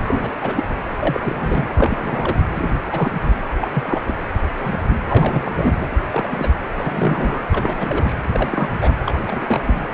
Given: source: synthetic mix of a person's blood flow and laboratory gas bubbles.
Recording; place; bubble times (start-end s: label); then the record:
Doppler ultrasound of blood flow; precordium
0.04-0.31 s: bubbles
0.41-0.64 s: bubbles
0.99-1.68 s: bubbles
1.72-2.37 s: bubbles
2.56-2.74 s: bubbles
2.91-3.12 s: bubbles
3.60-3.71 s: bubbles
3.74-4.02 s: bubbles
4.06-4.14 s: bubbles
4.56-4.78 s: bubbles
5.05-5.73 s: bubbles
5.80-5.87 s: bubbles
6.11-6.47 s: bubbles
6.75-7.42 s: bubbles
7.52-8.15 s: bubbles
8.32-8.70 s: bubbles
8.81-8.92 s: bubbles
9.06-9.15 s: bubbles
9.26-9.88 s: bubbles
From the record:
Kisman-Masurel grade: 242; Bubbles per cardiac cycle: several, 3 to 8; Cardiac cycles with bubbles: 100%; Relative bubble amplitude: moderate (0.250 to 0.450); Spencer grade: 3 (all of the cardiac periods contain showers or single bubble signals, but not dominating or overriding the cardiac motion signals); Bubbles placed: anywhere in the cardiac cycle